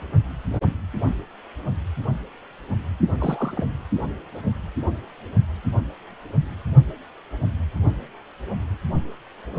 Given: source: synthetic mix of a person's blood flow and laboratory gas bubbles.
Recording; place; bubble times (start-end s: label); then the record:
Doppler ultrasound of blood flow; precordium
3.12-3.64 s: bubbles
From the record:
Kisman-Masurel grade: 211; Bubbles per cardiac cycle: several, 3 to 8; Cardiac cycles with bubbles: 1 to 10%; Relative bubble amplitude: barely perceptible (0.100 to 0.250); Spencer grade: 1 (occasional bubble signal discernible with the cardiac motion signal, with majority of cardiac periods free of bubbles); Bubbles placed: only in the low amplitude regions of the cardiac cycle